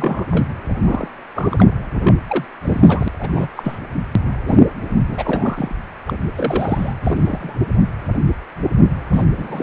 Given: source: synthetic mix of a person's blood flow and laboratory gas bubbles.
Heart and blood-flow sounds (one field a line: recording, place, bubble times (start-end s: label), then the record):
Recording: Doppler ultrasound of blood flow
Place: precordium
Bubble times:
0.00-0.25 s: bubbles
0.30-0.47 s: bubbles
0.83-1.08 s: bubbles
1.35-1.72 s: bubbles
2.02-2.15 s: bubbles
2.27-2.44 s: bubbles
2.62-3.08 s: bubbles
3.19-3.48 s: bubbles
3.56-3.78 s: bubbles
4.46-4.62 s: bubbles
5.09-5.73 s: bubbles
6.06-6.17 s: bubbles
6.35-6.94 s: bubbles
7.03-7.56 s: bubbles
9.10-9.24 s: bubbles
9.37-9.63 s: bubbles
From the record:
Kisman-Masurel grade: 232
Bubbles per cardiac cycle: several, 3 to 8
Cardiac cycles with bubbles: 50 to 99%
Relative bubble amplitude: moderate (0.250 to 0.450)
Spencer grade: 3 (all of the cardiac periods contain showers or single bubble signals, but not dominating or overriding the cardiac motion signals)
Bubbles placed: anywhere in the cardiac cycle